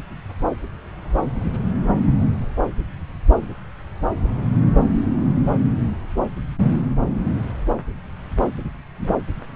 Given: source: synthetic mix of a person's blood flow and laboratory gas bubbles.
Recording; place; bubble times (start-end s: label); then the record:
Doppler ultrasound of blood flow; subclavian vein
9.04-9.10 s: bubbles
From the record:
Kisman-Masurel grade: 112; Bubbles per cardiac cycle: 1 to 2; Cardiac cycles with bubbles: 1 to 10%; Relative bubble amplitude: moderate (0.250 to 0.450); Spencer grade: 1 (occasional bubble signal discernible with the cardiac motion signal, with majority of cardiac periods free of bubbles); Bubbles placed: anywhere in the cardiac cycle